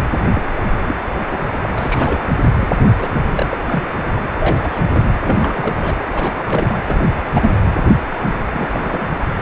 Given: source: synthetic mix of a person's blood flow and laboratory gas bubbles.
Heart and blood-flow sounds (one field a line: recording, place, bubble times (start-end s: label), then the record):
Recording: Doppler ultrasound of blood flow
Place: precordium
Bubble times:
0.00-0.09 s: bubbles
0.35-0.42 s: bubbles
0.86-0.95 s: bubbles
1.21-1.44 s: bubbles
1.62-2.20 s: bubbles
2.60-2.74 s: bubbles
2.78-2.88 s: bubbles
2.98-3.21 s: bubbles
3.35-3.46 s: bubbles
3.50-3.57 s: bubbles
3.66-3.84 s: bubbles
4.12-4.19 s: bubbles
4.39-4.82 s: bubbles
4.91-5.04 s: bubbles
5.25-5.96 s: bubbles
6.12-6.79 s: bubbles
6.87-7.06 s: bubbles
7.34-7.50 s: bubbles
8.21-8.42 s: bubbles
8.54-9.08 s: bubbles
9.37-9.42 s: bubbles
From the record:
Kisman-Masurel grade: 232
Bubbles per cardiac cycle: several, 3 to 8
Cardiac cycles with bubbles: 50 to 99%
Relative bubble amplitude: moderate (0.250 to 0.450)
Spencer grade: 3 (all of the cardiac periods contain showers or single bubble signals, but not dominating or overriding the cardiac motion signals)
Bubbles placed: anywhere in the cardiac cycle